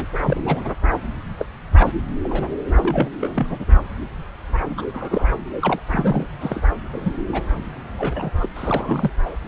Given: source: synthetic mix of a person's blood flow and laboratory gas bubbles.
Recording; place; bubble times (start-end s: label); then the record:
Doppler ultrasound of blood flow; subclavian vein
0.00-0.05 s: bubbles
0.18-0.72 s: bubbles
1.39-1.45 s: bubbles
1.75-1.93 s: bubbles
2.24-2.49 s: bubbles
2.76-3.09 s: bubbles
3.20-3.47 s: bubbles
3.50-3.66 s: bubbles
4.77-4.85 s: bubbles
4.94-5.26 s: bubbles
5.59-5.79 s: bubbles
5.87-6.27 s: bubbles
6.41-6.62 s: bubbles
6.92-7.11 s: bubbles
7.33-7.43 s: bubbles
7.96-8.30 s: bubbles
8.37-8.46 s: bubbles
8.55-9.11 s: bubbles
9.25-9.36 s: bubbles
From the record:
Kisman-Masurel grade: 242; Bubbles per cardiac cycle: several, 3 to 8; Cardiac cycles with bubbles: 100%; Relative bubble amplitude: moderate (0.250 to 0.450); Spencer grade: 3 (all of the cardiac periods contain showers or single bubble signals, but not dominating or overriding the cardiac motion signals); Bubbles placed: anywhere in the cardiac cycle